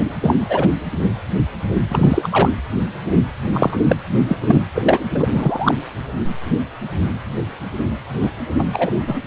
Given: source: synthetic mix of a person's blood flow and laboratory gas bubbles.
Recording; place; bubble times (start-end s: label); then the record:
Doppler ultrasound of blood flow; precordium
0.00-0.05 s: bubbles
0.22-0.34 s: bubbles
0.48-0.70 s: bubbles
1.90-2.49 s: bubbles
3.52-3.77 s: bubbles
3.88-3.97 s: bubbles
4.28-4.37 s: bubbles
4.42-4.63 s: bubbles
4.74-5.00 s: bubbles
5.14-5.28 s: bubbles
5.34-5.74 s: bubbles
8.21-8.31 s: bubbles
8.58-8.64 s: bubbles
8.72-8.91 s: bubbles
9.06-9.19 s: bubbles
From the record:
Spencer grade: 3 (all of the cardiac periods contain showers or single bubble signals, but not dominating or overriding the cardiac motion signals); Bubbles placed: anywhere in the cardiac cycle